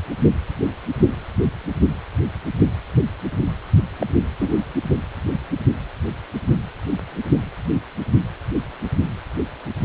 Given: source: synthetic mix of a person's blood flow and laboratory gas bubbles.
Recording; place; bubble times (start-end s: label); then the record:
Doppler ultrasound of blood flow; precordium
4.00-4.06 s: bubbles
4.39-4.58 s: bubbles
From the record:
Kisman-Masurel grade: 112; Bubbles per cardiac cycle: 1 to 2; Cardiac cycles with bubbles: 1 to 10%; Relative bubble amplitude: moderate (0.250 to 0.450); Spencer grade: 1 (occasional bubble signal discernible with the cardiac motion signal, with majority of cardiac periods free of bubbles); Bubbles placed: only in the low amplitude regions of the cardiac cycle